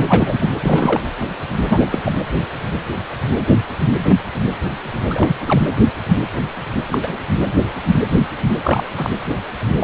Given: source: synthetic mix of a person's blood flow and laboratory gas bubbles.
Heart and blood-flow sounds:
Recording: Doppler ultrasound of blood flow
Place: precordium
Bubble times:
0.08-0.49 s: bubbles
0.60-1.01 s: bubbles
1.69-1.86 s: bubbles
1.92-2.12 s: bubbles
5.10-5.36 s: bubbles
5.46-5.62 s: bubbles
6.88-7.22 s: bubbles
8.63-8.86 s: bubbles
8.97-9.10 s: bubbles
9.79-9.83 s: bubbles
From the record:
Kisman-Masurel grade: 222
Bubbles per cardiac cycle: several, 3 to 8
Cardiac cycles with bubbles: 10 to 50%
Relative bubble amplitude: moderate (0.250 to 0.450)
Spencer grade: 2 (many but less than half of the cardiac periods contain bubble signals, singularly or in groups)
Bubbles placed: anywhere in the cardiac cycle

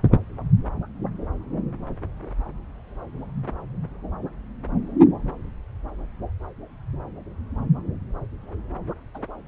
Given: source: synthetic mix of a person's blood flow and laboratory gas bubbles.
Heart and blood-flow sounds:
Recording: Doppler ultrasound of blood flow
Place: subclavian vein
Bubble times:
9.15-9.19 s: bubbles
From the record:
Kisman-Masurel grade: 111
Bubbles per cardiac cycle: 1 to 2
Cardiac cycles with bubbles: 1 to 10%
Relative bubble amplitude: barely perceptible (0.100 to 0.250)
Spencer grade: 1 (occasional bubble signal discernible with the cardiac motion signal, with majority of cardiac periods free of bubbles)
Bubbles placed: anywhere in the cardiac cycle

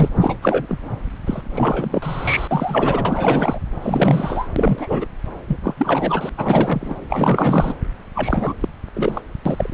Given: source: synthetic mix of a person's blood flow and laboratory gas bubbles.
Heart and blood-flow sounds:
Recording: Doppler ultrasound of blood flow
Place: subclavian vein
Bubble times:
0.00-0.09 s: bubbles
0.15-0.38 s: bubbles
0.42-0.67 s: bubbles
0.69-0.77 s: bubbles
1.26-1.42 s: bubbles
1.53-2.47 s: bubbles
2.51-3.58 s: bubbles
3.82-4.47 s: bubbles
4.56-5.06 s: bubbles
5.48-5.58 s: bubbles
5.63-5.75 s: bubbles
5.77-6.29 s: bubbles
6.38-6.96 s: bubbles
7.10-7.74 s: bubbles
8.15-8.54 s: bubbles
8.61-8.69 s: bubbles
8.96-9.21 s: bubbles
9.45-9.74 s: bubbles
From the record:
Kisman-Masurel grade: 342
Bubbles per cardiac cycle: rolling drumbeat, 9 or more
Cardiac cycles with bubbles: 100%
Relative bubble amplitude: moderate (0.250 to 0.450)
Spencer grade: 3 (all of the cardiac periods contain showers or single bubble signals, but not dominating or overriding the cardiac motion signals)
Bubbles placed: anywhere in the cardiac cycle

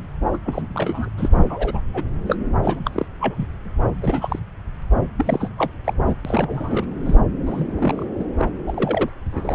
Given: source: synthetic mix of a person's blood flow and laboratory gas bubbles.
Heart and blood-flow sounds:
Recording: Doppler ultrasound of blood flow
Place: subclavian vein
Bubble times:
0.33-0.37 s: bubbles
0.46-0.67 s: bubbles
0.74-1.10 s: bubbles
1.17-1.29 s: bubbles
1.50-1.80 s: bubbles
1.94-2.06 s: bubbles
2.26-2.35 s: bubbles
2.62-2.79 s: bubbles
2.84-3.05 s: bubbles
3.20-3.46 s: bubbles
4.02-4.39 s: bubbles
5.17-5.50 s: bubbles
5.58-5.71 s: bubbles
5.84-5.94 s: bubbles
6.08-6.16 s: bubbles
6.25-6.85 s: bubbles
7.06-7.15 s: bubbles
7.46-7.65 s: bubbles
7.75-8.06 s: bubbles
8.19-8.24 s: bubbles
8.38-8.45 s: bubbles
8.66-9.09 s: bubbles
9.32-9.54 s: bubbles
From the record:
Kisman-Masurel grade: 242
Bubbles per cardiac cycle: several, 3 to 8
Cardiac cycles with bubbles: 100%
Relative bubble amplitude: moderate (0.250 to 0.450)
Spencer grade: 3 (all of the cardiac periods contain showers or single bubble signals, but not dominating or overriding the cardiac motion signals)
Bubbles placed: anywhere in the cardiac cycle

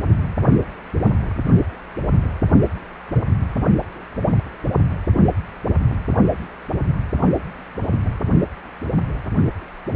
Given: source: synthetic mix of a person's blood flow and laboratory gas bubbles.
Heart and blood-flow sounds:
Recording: Doppler ultrasound of blood flow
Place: precordium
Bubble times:
no bubbles
From the record:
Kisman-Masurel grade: 000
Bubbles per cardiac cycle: 0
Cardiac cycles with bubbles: 0%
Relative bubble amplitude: no bubbles discernible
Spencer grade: 0 (complete lack of bubble signals)

